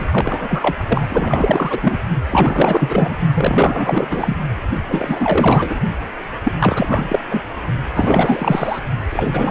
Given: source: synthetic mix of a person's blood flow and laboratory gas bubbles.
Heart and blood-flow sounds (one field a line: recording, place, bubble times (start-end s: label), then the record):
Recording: Doppler ultrasound of blood flow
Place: precordium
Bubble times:
0.00-0.05 s: bubbles
0.12-0.77 s: bubbles
0.88-1.99 s: bubbles
2.31-3.17 s: bubbles
3.34-4.36 s: bubbles
4.86-5.79 s: bubbles
6.43-6.52 s: bubbles
6.59-7.20 s: bubbles
7.30-7.42 s: bubbles
7.95-8.79 s: bubbles
9.10-9.51 s: bubbles
From the record:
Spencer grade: 4 (maximum detectable bubble signal sounding continuously throughout systole and diastole of every cardiac period, and overriding the amplitude of the normal cardiac signals)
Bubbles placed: only in the low amplitude regions of the cardiac cycle